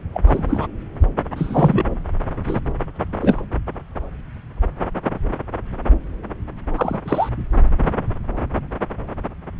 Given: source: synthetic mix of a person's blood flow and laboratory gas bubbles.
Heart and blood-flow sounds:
Doppler ultrasound of blood flow; subclavian vein
0.13-0.21 s: bubbles
0.26-0.67 s: bubbles
1.35-1.85 s: bubbles
2.46-2.60 s: bubbles
3.21-3.44 s: bubbles
6.76-7.01 s: bubbles
7.05-7.29 s: bubbles
From the record:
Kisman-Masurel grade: 233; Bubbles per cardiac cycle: several, 3 to 8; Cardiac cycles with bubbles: 50 to 99%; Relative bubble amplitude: loud (0.450 to 0.775); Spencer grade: 3 (all of the cardiac periods contain showers or single bubble signals, but not dominating or overriding the cardiac motion signals); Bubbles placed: anywhere in the cardiac cycle

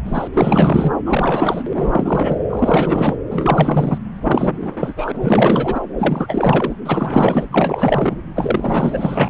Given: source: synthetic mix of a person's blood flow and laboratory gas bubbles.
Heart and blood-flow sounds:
Doppler ultrasound of blood flow; subclavian vein
0.05-0.28 s: bubbles
0.33-0.93 s: bubbles
1.05-1.62 s: bubbles
1.74-2.38 s: bubbles
2.49-3.16 s: bubbles
3.30-3.98 s: bubbles
4.23-4.94 s: bubbles
4.96-5.80 s: bubbles
5.97-6.73 s: bubbles
6.85-7.45 s: bubbles
7.52-8.15 s: bubbles
8.35-9.29 s: bubbles
From the record:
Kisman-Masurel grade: 444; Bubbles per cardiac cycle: continuous sound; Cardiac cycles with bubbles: 100%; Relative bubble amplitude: maximal (0.775 to 0.999); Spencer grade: 4 (maximum detectable bubble signal sounding continuously throughout systole and diastole of every cardiac period, and overriding the amplitude of the normal cardiac signals); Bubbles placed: anywhere in the cardiac cycle

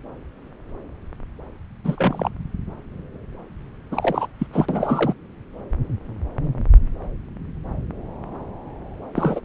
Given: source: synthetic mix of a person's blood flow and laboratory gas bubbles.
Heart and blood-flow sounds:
Doppler ultrasound of blood flow; subclavian vein
1.84-2.34 s: bubbles
3.91-4.27 s: bubbles
4.39-4.46 s: bubbles
4.53-4.66 s: bubbles
4.69-5.15 s: bubbles
9.15-9.40 s: bubbles
From the record:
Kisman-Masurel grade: 222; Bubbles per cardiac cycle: several, 3 to 8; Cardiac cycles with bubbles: 10 to 50%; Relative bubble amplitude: moderate (0.250 to 0.450); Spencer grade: 2 (many but less than half of the cardiac periods contain bubble signals, singularly or in groups); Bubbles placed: anywhere in the cardiac cycle

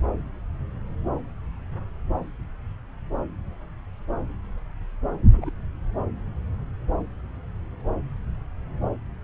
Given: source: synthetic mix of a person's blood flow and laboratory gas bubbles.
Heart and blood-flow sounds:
Doppler ultrasound of blood flow; subclavian vein
5.32-5.51 s: bubbles
From the record:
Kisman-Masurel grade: 111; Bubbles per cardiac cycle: 1 to 2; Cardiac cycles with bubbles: 1 to 10%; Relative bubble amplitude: barely perceptible (0.100 to 0.250); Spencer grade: 1 (occasional bubble signal discernible with the cardiac motion signal, with majority of cardiac periods free of bubbles); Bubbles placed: anywhere in the cardiac cycle

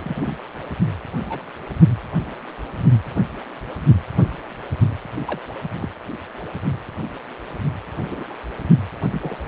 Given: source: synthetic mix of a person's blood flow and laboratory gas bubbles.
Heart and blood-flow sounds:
Doppler ultrasound of blood flow; precordium
0.00-0.36 s: bubbles
1.29-1.43 s: bubbles
5.26-5.39 s: bubbles
5.80-5.89 s: bubbles
8.00-8.25 s: bubbles
8.30-8.35 s: bubbles
9.12-9.38 s: bubbles
From the record:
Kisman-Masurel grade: 121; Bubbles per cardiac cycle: 1 to 2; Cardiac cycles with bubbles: 10 to 50%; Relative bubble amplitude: barely perceptible (0.100 to 0.250); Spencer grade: 2 (many but less than half of the cardiac periods contain bubble signals, singularly or in groups); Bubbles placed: only in the low amplitude regions of the cardiac cycle

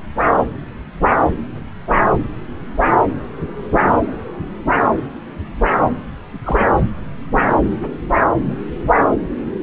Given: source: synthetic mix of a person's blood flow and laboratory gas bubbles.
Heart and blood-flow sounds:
Doppler ultrasound of blood flow; subclavian vein
6.43-6.59 s: bubbles
From the record:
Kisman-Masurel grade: 112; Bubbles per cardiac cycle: 1 to 2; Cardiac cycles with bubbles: 1 to 10%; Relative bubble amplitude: moderate (0.250 to 0.450); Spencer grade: 1 (occasional bubble signal discernible with the cardiac motion signal, with majority of cardiac periods free of bubbles); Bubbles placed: anywhere in the cardiac cycle

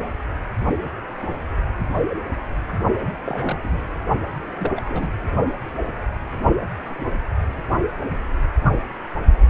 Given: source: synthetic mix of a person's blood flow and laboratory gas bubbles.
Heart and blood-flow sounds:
Doppler ultrasound of blood flow; precordium
3.24-3.79 s: bubbles
4.60-4.73 s: bubbles
4.75-4.82 s: bubbles
4.85-5.12 s: bubbles
From the record:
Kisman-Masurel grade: 221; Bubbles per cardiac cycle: several, 3 to 8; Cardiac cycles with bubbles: 10 to 50%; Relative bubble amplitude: barely perceptible (0.100 to 0.250); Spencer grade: 2 (many but less than half of the cardiac periods contain bubble signals, singularly or in groups); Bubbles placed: only in the low amplitude regions of the cardiac cycle

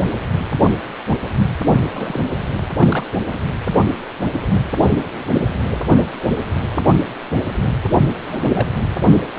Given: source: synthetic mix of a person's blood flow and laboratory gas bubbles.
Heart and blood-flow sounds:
Doppler ultrasound of blood flow; precordium
1.95-2.18 s: bubbles
2.78-3.05 s: bubbles
3.28-3.40 s: bubbles
8.30-8.68 s: bubbles
From the record:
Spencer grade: 2 (many but less than half of the cardiac periods contain bubble signals, singularly or in groups); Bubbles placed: anywhere in the cardiac cycle

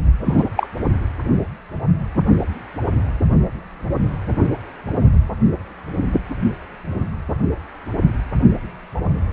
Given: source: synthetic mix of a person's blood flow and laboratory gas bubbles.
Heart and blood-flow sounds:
Doppler ultrasound of blood flow; precordium
0.26-0.44 s: bubbles
0.56-0.67 s: bubbles
From the record:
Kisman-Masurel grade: 113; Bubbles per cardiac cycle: 1 to 2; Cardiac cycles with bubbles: 1 to 10%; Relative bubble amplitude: loud (0.450 to 0.775); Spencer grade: 1 (occasional bubble signal discernible with the cardiac motion signal, with majority of cardiac periods free of bubbles); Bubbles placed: only in the low amplitude regions of the cardiac cycle

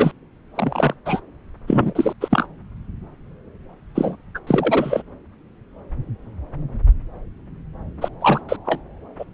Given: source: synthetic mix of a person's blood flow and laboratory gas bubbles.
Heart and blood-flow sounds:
Doppler ultrasound of blood flow; subclavian vein
0.00-0.11 s: bubbles
0.54-0.95 s: bubbles
1.05-1.21 s: bubbles
1.67-2.13 s: bubbles
2.20-2.47 s: bubbles
3.95-4.16 s: bubbles
4.34-4.39 s: bubbles
4.46-5.02 s: bubbles
8.01-8.09 s: bubbles
8.21-8.41 s: bubbles
8.49-8.57 s: bubbles
8.65-8.81 s: bubbles
9.19-9.25 s: bubbles
From the record:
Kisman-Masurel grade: 223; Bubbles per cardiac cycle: several, 3 to 8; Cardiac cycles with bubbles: 10 to 50%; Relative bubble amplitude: loud (0.450 to 0.775); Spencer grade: 2 (many but less than half of the cardiac periods contain bubble signals, singularly or in groups); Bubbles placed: anywhere in the cardiac cycle

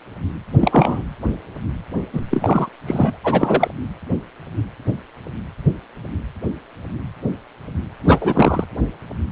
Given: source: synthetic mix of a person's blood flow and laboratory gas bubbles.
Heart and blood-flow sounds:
Doppler ultrasound of blood flow; precordium
0.59-1.04 s: bubbles
2.13-2.21 s: bubbles
2.30-2.69 s: bubbles
2.86-3.18 s: bubbles
3.23-3.68 s: bubbles
8.05-8.64 s: bubbles
From the record:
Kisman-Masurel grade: 223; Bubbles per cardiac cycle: several, 3 to 8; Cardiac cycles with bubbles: 10 to 50%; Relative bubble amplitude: loud (0.450 to 0.775); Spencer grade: 2 (many but less than half of the cardiac periods contain bubble signals, singularly or in groups); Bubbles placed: anywhere in the cardiac cycle

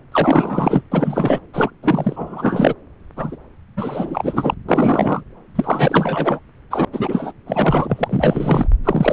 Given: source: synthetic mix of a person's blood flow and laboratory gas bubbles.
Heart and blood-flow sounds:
Doppler ultrasound of blood flow; subclavian vein
0.12-0.82 s: bubbles
0.92-1.40 s: bubbles
1.53-1.72 s: bubbles
1.82-2.74 s: bubbles
3.17-3.36 s: bubbles
3.77-4.54 s: bubbles
4.69-5.23 s: bubbles
5.55-6.40 s: bubbles
6.71-6.85 s: bubbles
6.93-7.33 s: bubbles
7.46-8.69 s: bubbles
8.84-9.13 s: bubbles
From the record:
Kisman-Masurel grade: 444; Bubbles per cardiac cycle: continuous sound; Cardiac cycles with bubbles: 100%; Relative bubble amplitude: maximal (0.775 to 0.999); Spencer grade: 4 (maximum detectable bubble signal sounding continuously throughout systole and diastole of every cardiac period, and overriding the amplitude of the normal cardiac signals); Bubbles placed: anywhere in the cardiac cycle

